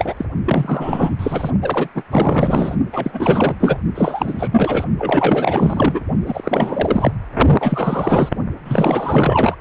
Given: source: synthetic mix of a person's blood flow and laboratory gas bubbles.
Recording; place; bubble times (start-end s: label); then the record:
Doppler ultrasound of blood flow; precordium
0.00-0.25 s: bubbles
0.46-1.16 s: bubbles
1.19-1.51 s: bubbles
1.61-1.89 s: bubbles
1.94-2.03 s: bubbles
2.10-2.75 s: bubbles
2.92-3.56 s: bubbles
3.60-3.77 s: bubbles
3.94-4.48 s: bubbles
4.51-4.84 s: bubbles
4.98-6.00 s: bubbles
6.25-7.12 s: bubbles
7.59-8.29 s: bubbles
8.64-9.55 s: bubbles
From the record:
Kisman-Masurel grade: 444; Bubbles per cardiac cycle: continuous sound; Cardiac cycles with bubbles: 100%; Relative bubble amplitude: maximal (0.775 to 0.999); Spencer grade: 4 (maximum detectable bubble signal sounding continuously throughout systole and diastole of every cardiac period, and overriding the amplitude of the normal cardiac signals); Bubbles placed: only in the low amplitude regions of the cardiac cycle